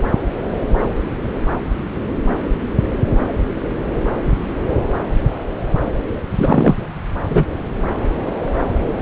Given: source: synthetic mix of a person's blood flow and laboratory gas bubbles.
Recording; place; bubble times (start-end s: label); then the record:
Doppler ultrasound of blood flow; subclavian vein
6.33-6.76 s: bubbles
7.28-7.45 s: bubbles
From the record:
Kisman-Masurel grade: 223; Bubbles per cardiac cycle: several, 3 to 8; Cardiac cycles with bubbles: 10 to 50%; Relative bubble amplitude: loud (0.450 to 0.775); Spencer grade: 2 (many but less than half of the cardiac periods contain bubble signals, singularly or in groups); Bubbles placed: anywhere in the cardiac cycle